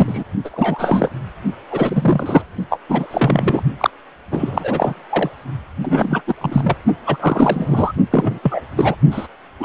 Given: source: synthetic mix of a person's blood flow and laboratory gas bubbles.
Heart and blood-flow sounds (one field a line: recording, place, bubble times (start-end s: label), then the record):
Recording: Doppler ultrasound of blood flow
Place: precordium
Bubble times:
0.00-0.23 s: bubbles
0.45-1.09 s: bubbles
1.69-2.44 s: bubbles
2.70-2.79 s: bubbles
2.89-3.08 s: bubbles
3.10-3.63 s: bubbles
3.79-3.90 s: bubbles
4.30-5.00 s: bubbles
5.09-5.29 s: bubbles
5.82-6.21 s: bubbles
6.27-6.34 s: bubbles
6.40-6.76 s: bubbles
7.06-7.17 s: bubbles
7.19-7.92 s: bubbles
8.11-8.39 s: bubbles
8.43-8.62 s: bubbles
8.76-8.96 s: bubbles
9.11-9.28 s: bubbles
9.59-9.65 s: bubbles
From the record:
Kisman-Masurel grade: 343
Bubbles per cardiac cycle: rolling drumbeat, 9 or more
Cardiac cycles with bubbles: 100%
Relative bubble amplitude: loud (0.450 to 0.775)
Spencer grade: 3 (all of the cardiac periods contain showers or single bubble signals, but not dominating or overriding the cardiac motion signals)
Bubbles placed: only in the low amplitude regions of the cardiac cycle